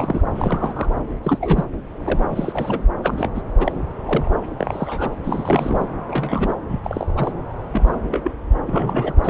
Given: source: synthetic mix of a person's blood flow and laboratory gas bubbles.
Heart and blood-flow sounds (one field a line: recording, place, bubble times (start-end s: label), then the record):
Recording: Doppler ultrasound of blood flow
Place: subclavian vein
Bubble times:
0.00-0.21 s: bubbles
0.35-0.92 s: bubbles
1.23-1.64 s: bubbles
2.05-2.19 s: bubbles
2.30-2.83 s: bubbles
3.01-3.30 s: bubbles
3.35-3.42 s: bubbles
3.60-3.72 s: bubbles
4.05-4.31 s: bubbles
4.58-5.16 s: bubbles
5.23-5.88 s: bubbles
6.08-6.56 s: bubbles
6.68-6.80 s: bubbles
6.84-7.32 s: bubbles
7.72-7.96 s: bubbles
8.07-8.21 s: bubbles
8.23-8.31 s: bubbles
8.66-9.13 s: bubbles
9.24-9.30 s: bubbles
From the record:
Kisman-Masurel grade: 242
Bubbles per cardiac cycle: several, 3 to 8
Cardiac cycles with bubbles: 100%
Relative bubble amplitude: moderate (0.250 to 0.450)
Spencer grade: 3 (all of the cardiac periods contain showers or single bubble signals, but not dominating or overriding the cardiac motion signals)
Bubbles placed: anywhere in the cardiac cycle